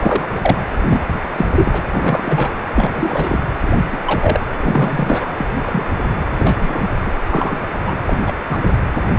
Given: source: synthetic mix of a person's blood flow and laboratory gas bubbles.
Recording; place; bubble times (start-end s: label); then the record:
Doppler ultrasound of blood flow; precordium
0.01-0.24 s: bubbles
0.29-0.56 s: bubbles
0.88-1.04 s: bubbles
1.35-1.46 s: bubbles
1.55-1.82 s: bubbles
1.93-2.50 s: bubbles
2.75-3.41 s: bubbles
3.67-3.72 s: bubbles
3.92-3.99 s: bubbles
4.05-4.40 s: bubbles
4.61-5.32 s: bubbles
5.37-5.46 s: bubbles
5.65-5.85 s: bubbles
6.02-6.12 s: bubbles
6.37-6.86 s: bubbles
7.06-7.11 s: bubbles
7.29-7.64 s: bubbles
7.86-7.97 s: bubbles
8.05-8.19 s: bubbles
8.27-8.33 s: bubbles
8.48-8.76 s: bubbles
From the record:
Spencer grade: 3 (all of the cardiac periods contain showers or single bubble signals, but not dominating or overriding the cardiac motion signals); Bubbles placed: anywhere in the cardiac cycle